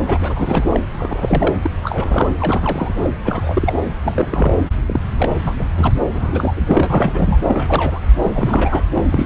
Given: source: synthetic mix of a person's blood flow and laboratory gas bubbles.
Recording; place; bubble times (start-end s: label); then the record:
Doppler ultrasound of blood flow; subclavian vein
0.05-0.80 s: bubbles
0.95-1.54 s: bubbles
1.62-1.70 s: bubbles
1.83-2.29 s: bubbles
2.40-2.92 s: bubbles
2.96-3.10 s: bubbles
3.24-3.79 s: bubbles
4.05-4.58 s: bubbles
4.86-5.00 s: bubbles
5.17-5.29 s: bubbles
5.44-5.54 s: bubbles
5.58-5.66 s: bubbles
5.75-5.93 s: bubbles
6.13-7.38 s: bubbles
7.48-7.99 s: bubbles
8.22-8.83 s: bubbles
8.95-9.26 s: bubbles
From the record:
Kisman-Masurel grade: 342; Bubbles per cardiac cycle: rolling drumbeat, 9 or more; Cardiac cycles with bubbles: 100%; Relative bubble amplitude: moderate (0.250 to 0.450); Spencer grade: 3 (all of the cardiac periods contain showers or single bubble signals, but not dominating or overriding the cardiac motion signals); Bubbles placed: anywhere in the cardiac cycle